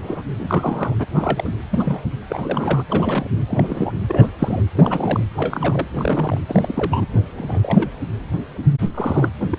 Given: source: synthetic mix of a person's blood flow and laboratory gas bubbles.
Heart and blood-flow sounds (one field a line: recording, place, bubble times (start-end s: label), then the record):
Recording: Doppler ultrasound of blood flow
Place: precordium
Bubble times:
0.02-0.22 s: bubbles
0.38-0.94 s: bubbles
0.98-1.06 s: bubbles
1.11-1.51 s: bubbles
1.71-2.06 s: bubbles
2.29-2.83 s: bubbles
2.88-3.29 s: bubbles
3.48-3.92 s: bubbles
4.07-4.32 s: bubbles
4.39-4.62 s: bubbles
4.75-5.25 s: bubbles
5.36-5.88 s: bubbles
5.97-6.38 s: bubbles
6.48-7.09 s: bubbles
7.37-7.90 s: bubbles
8.94-9.29 s: bubbles
9.40-9.47 s: bubbles
9.50-9.59 s: bubbles
From the record:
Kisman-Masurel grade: 232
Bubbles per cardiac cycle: several, 3 to 8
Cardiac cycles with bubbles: 50 to 99%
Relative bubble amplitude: moderate (0.250 to 0.450)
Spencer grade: 3 (all of the cardiac periods contain showers or single bubble signals, but not dominating or overriding the cardiac motion signals)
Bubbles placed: anywhere in the cardiac cycle